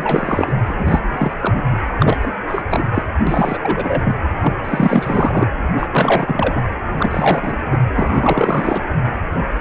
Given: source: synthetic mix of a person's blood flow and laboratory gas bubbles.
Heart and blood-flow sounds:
Doppler ultrasound of blood flow; precordium
0.00-0.53 s: bubbles
0.68-0.99 s: bubbles
1.11-1.32 s: bubbles
1.41-1.62 s: bubbles
1.69-1.78 s: bubbles
1.99-2.20 s: bubbles
2.23-2.33 s: bubbles
2.47-2.62 s: bubbles
2.70-2.84 s: bubbles
2.94-3.03 s: bubbles
3.27-4.16 s: bubbles
4.41-4.53 s: bubbles
4.65-5.46 s: bubbles
5.77-5.87 s: bubbles
5.92-6.63 s: bubbles
6.99-7.56 s: bubbles
7.71-7.77 s: bubbles
7.95-8.81 s: bubbles
From the record:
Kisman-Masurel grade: 333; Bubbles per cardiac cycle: rolling drumbeat, 9 or more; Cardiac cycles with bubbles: 50 to 99%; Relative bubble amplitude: loud (0.450 to 0.775); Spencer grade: 3 (all of the cardiac periods contain showers or single bubble signals, but not dominating or overriding the cardiac motion signals); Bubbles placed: anywhere in the cardiac cycle

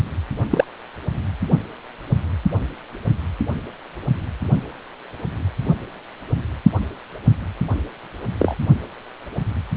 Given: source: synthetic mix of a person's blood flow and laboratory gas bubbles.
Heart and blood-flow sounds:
Doppler ultrasound of blood flow; precordium
0.50-0.65 s: bubbles
8.39-8.55 s: bubbles
From the record:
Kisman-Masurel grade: 123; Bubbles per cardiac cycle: 1 to 2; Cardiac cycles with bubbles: 10 to 50%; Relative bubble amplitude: loud (0.450 to 0.775); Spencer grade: 2 (many but less than half of the cardiac periods contain bubble signals, singularly or in groups); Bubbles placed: only in the low amplitude regions of the cardiac cycle

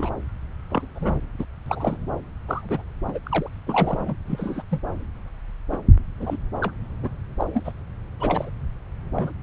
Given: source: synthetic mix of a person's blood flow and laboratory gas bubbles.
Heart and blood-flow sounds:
Doppler ultrasound of blood flow; subclavian vein
0.00-0.11 s: bubbles
0.70-0.86 s: bubbles
0.95-1.20 s: bubbles
1.38-1.44 s: bubbles
1.67-1.97 s: bubbles
2.48-2.82 s: bubbles
3.07-3.19 s: bubbles
3.23-3.50 s: bubbles
3.67-4.14 s: bubbles
4.27-4.62 s: bubbles
4.70-4.81 s: bubbles
5.71-5.77 s: bubbles
6.20-6.37 s: bubbles
6.61-6.71 s: bubbles
7.03-7.09 s: bubbles
7.39-7.72 s: bubbles
8.20-8.50 s: bubbles
9.15-9.33 s: bubbles
From the record:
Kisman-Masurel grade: 242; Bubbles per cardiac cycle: several, 3 to 8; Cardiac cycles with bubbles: 100%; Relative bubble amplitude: moderate (0.250 to 0.450); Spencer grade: 3 (all of the cardiac periods contain showers or single bubble signals, but not dominating or overriding the cardiac motion signals); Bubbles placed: anywhere in the cardiac cycle

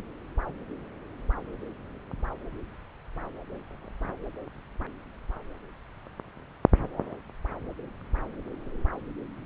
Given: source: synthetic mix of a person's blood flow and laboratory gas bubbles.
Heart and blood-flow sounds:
Doppler ultrasound of blood flow; subclavian vein
no bubbles
From the record:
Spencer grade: 0 (complete lack of bubble signals)

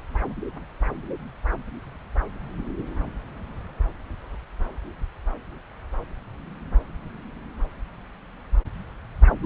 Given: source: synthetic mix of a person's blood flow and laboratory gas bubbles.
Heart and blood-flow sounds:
Doppler ultrasound of blood flow; subclavian vein
9.42-9.46 s: bubbles
From the record:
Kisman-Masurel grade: 211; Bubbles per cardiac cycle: several, 3 to 8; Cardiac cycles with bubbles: 1 to 10%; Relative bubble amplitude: barely perceptible (0.100 to 0.250); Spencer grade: 1 (occasional bubble signal discernible with the cardiac motion signal, with majority of cardiac periods free of bubbles); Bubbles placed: anywhere in the cardiac cycle

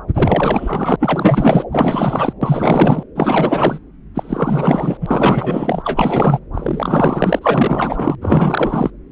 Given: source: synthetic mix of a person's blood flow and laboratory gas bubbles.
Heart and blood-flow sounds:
Doppler ultrasound of blood flow; subclavian vein
0.14-0.96 s: bubbles
1.00-1.65 s: bubbles
1.71-2.33 s: bubbles
2.41-3.03 s: bubbles
3.15-3.79 s: bubbles
4.15-4.97 s: bubbles
5.01-6.40 s: bubbles
6.54-8.15 s: bubbles
8.21-8.90 s: bubbles
From the record:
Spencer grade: 4 (maximum detectable bubble signal sounding continuously throughout systole and diastole of every cardiac period, and overriding the amplitude of the normal cardiac signals); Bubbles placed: anywhere in the cardiac cycle

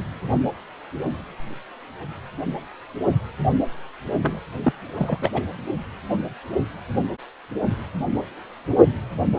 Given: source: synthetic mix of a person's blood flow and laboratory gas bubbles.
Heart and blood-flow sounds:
Doppler ultrasound of blood flow; precordium
4.21-4.40 s: bubbles
4.62-4.73 s: bubbles
4.95-5.30 s: bubbles
5.33-5.42 s: bubbles
From the record:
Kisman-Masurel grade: 212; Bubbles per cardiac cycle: several, 3 to 8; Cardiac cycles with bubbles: 1 to 10%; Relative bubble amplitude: moderate (0.250 to 0.450); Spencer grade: 1 (occasional bubble signal discernible with the cardiac motion signal, with majority of cardiac periods free of bubbles); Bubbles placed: anywhere in the cardiac cycle

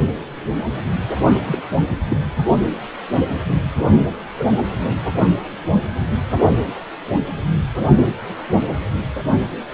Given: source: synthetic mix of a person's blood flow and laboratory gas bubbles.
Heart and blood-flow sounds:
Doppler ultrasound of blood flow; precordium
1.46-1.62 s: bubbles
2.08-2.17 s: bubbles
3.96-4.07 s: bubbles
4.38-4.46 s: bubbles
From the record:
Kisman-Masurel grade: 122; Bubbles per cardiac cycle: 1 to 2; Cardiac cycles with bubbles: 10 to 50%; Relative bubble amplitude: moderate (0.250 to 0.450); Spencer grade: 2 (many but less than half of the cardiac periods contain bubble signals, singularly or in groups); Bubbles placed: anywhere in the cardiac cycle

